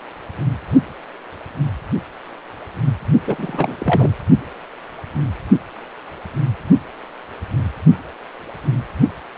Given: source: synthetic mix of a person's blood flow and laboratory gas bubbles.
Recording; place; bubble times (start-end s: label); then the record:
Doppler ultrasound of blood flow; precordium
3.27-4.11 s: bubbles
From the record:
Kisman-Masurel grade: 212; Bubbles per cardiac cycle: several, 3 to 8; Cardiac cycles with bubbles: 1 to 10%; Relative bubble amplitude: moderate (0.250 to 0.450); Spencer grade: 1 (occasional bubble signal discernible with the cardiac motion signal, with majority of cardiac periods free of bubbles); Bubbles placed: only in the low amplitude regions of the cardiac cycle